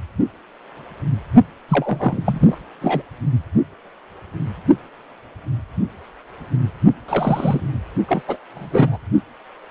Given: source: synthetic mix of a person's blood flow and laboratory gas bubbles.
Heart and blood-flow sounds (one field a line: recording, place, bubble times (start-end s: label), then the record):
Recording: Doppler ultrasound of blood flow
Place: precordium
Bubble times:
1.68-2.58 s: bubbles
2.81-3.03 s: bubbles
7.08-7.61 s: bubbles
8.08-8.22 s: bubbles
8.27-8.38 s: bubbles
8.54-8.97 s: bubbles
From the record:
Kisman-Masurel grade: 222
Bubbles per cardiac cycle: several, 3 to 8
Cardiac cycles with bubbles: 10 to 50%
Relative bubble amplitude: moderate (0.250 to 0.450)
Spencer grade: 2 (many but less than half of the cardiac periods contain bubble signals, singularly or in groups)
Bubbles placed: only in the low amplitude regions of the cardiac cycle